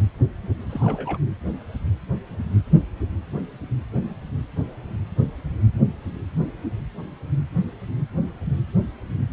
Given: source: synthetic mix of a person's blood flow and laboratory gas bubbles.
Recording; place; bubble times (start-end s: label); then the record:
Doppler ultrasound of blood flow; precordium
0.69-1.18 s: bubbles
From the record:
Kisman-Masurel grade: 111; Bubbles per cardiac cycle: 1 to 2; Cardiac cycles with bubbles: 1 to 10%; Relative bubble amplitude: barely perceptible (0.100 to 0.250); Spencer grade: 1 (occasional bubble signal discernible with the cardiac motion signal, with majority of cardiac periods free of bubbles); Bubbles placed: anywhere in the cardiac cycle